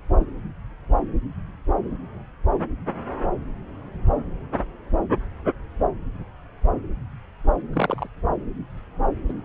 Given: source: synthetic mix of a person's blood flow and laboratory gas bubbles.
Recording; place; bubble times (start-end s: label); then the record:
Doppler ultrasound of blood flow; subclavian vein
7.72-8.07 s: bubbles
9.29-9.32 s: bubbles
From the record:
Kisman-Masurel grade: 122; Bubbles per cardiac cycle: 1 to 2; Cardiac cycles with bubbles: 10 to 50%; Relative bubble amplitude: moderate (0.250 to 0.450); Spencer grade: 2 (many but less than half of the cardiac periods contain bubble signals, singularly or in groups); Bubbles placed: anywhere in the cardiac cycle